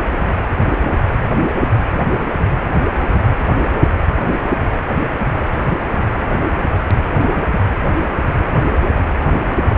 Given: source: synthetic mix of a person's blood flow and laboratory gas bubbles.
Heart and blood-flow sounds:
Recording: Doppler ultrasound of blood flow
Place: precordium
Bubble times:
7.19-7.43 s: bubbles
From the record:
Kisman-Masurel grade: 113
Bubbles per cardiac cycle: 1 to 2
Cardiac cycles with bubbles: 1 to 10%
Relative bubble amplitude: loud (0.450 to 0.775)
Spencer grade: 1 (occasional bubble signal discernible with the cardiac motion signal, with majority of cardiac periods free of bubbles)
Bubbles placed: anywhere in the cardiac cycle

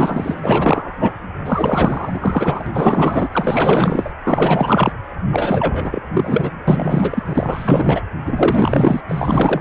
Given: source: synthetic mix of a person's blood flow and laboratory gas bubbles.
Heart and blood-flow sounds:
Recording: Doppler ultrasound of blood flow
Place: precordium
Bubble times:
0.00-0.94 s: bubbles
0.99-1.14 s: bubbles
1.45-3.29 s: bubbles
3.31-4.11 s: bubbles
4.24-4.93 s: bubbles
5.30-6.03 s: bubbles
6.13-6.51 s: bubbles
6.68-7.23 s: bubbles
7.26-8.01 s: bubbles
8.25-9.01 s: bubbles
9.09-9.61 s: bubbles
From the record:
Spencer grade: 4 (maximum detectable bubble signal sounding continuously throughout systole and diastole of every cardiac period, and overriding the amplitude of the normal cardiac signals)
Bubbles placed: anywhere in the cardiac cycle

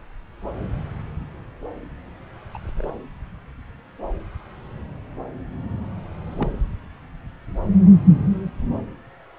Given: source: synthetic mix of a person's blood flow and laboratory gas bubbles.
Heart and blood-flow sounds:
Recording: Doppler ultrasound of blood flow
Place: subclavian vein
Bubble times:
2.54-2.61 s: bubbles
2.65-2.73 s: bubbles
2.77-2.92 s: bubbles
6.27-6.60 s: bubbles
From the record:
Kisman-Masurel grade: 121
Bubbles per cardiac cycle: 1 to 2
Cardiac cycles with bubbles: 10 to 50%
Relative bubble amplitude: barely perceptible (0.100 to 0.250)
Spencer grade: 2 (many but less than half of the cardiac periods contain bubble signals, singularly or in groups)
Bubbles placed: anywhere in the cardiac cycle

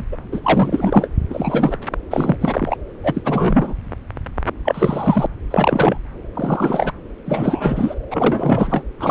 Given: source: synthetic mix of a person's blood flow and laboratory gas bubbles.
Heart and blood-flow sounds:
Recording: Doppler ultrasound of blood flow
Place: subclavian vein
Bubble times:
0.00-0.05 s: bubbles
0.11-0.17 s: bubbles
0.32-1.08 s: bubbles
1.29-1.78 s: bubbles
2.10-2.36 s: bubbles
2.41-2.77 s: bubbles
3.03-3.74 s: bubbles
4.65-5.27 s: bubbles
5.50-5.98 s: bubbles
6.35-6.92 s: bubbles
7.26-7.95 s: bubbles
8.10-8.83 s: bubbles
8.99-9.11 s: bubbles
From the record:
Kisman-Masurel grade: 343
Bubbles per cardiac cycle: rolling drumbeat, 9 or more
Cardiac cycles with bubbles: 100%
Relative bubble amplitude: loud (0.450 to 0.775)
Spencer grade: 3 (all of the cardiac periods contain showers or single bubble signals, but not dominating or overriding the cardiac motion signals)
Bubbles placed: anywhere in the cardiac cycle

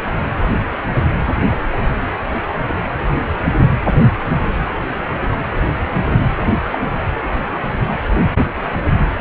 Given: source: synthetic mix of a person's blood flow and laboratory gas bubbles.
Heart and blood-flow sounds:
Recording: Doppler ultrasound of blood flow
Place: precordium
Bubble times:
6.71-6.78 s: bubbles
From the record:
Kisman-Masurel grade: 112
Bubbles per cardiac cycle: 1 to 2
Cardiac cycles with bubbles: 1 to 10%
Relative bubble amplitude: moderate (0.250 to 0.450)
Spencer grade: 1 (occasional bubble signal discernible with the cardiac motion signal, with majority of cardiac periods free of bubbles)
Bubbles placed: anywhere in the cardiac cycle

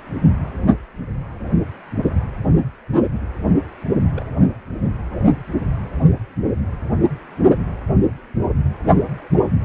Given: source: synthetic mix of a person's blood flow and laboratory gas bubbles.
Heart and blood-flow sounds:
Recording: Doppler ultrasound of blood flow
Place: precordium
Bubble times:
4.14-4.25 s: bubbles
4.37-4.39 s: bubbles
From the record:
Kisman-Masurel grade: 111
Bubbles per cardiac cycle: 1 to 2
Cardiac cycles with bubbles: 1 to 10%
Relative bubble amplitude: barely perceptible (0.100 to 0.250)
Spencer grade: 1 (occasional bubble signal discernible with the cardiac motion signal, with majority of cardiac periods free of bubbles)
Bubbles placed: only in the low amplitude regions of the cardiac cycle

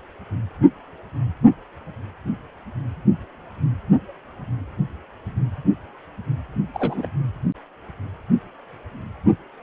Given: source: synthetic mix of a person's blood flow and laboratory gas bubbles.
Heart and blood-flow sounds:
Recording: Doppler ultrasound of blood flow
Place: precordium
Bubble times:
6.74-7.07 s: bubbles
From the record:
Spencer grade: 1 (occasional bubble signal discernible with the cardiac motion signal, with majority of cardiac periods free of bubbles)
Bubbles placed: only in the low amplitude regions of the cardiac cycle

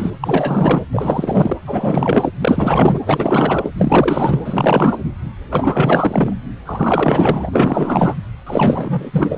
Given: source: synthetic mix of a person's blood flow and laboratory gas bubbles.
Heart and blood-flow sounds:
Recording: Doppler ultrasound of blood flow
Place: precordium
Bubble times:
0.00-0.11 s: bubbles
0.21-0.84 s: bubbles
0.91-1.57 s: bubbles
1.66-2.31 s: bubbles
2.40-3.00 s: bubbles
3.06-3.70 s: bubbles
3.77-4.97 s: bubbles
5.51-6.34 s: bubbles
6.66-7.49 s: bubbles
7.51-8.15 s: bubbles
8.46-9.38 s: bubbles
From the record:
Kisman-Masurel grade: 444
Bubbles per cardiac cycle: continuous sound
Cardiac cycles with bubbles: 100%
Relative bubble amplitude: maximal (0.775 to 0.999)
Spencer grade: 4 (maximum detectable bubble signal sounding continuously throughout systole and diastole of every cardiac period, and overriding the amplitude of the normal cardiac signals)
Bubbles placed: anywhere in the cardiac cycle

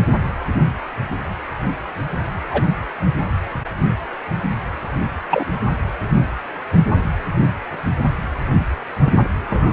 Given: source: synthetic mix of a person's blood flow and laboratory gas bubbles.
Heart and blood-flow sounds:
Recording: Doppler ultrasound of blood flow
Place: precordium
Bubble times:
2.50-2.68 s: bubbles
5.30-5.45 s: bubbles
9.04-9.23 s: bubbles
9.50-9.73 s: bubbles
From the record:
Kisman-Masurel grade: 122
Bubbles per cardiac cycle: 1 to 2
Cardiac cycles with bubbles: 10 to 50%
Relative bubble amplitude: moderate (0.250 to 0.450)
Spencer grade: 2 (many but less than half of the cardiac periods contain bubble signals, singularly or in groups)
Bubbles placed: anywhere in the cardiac cycle

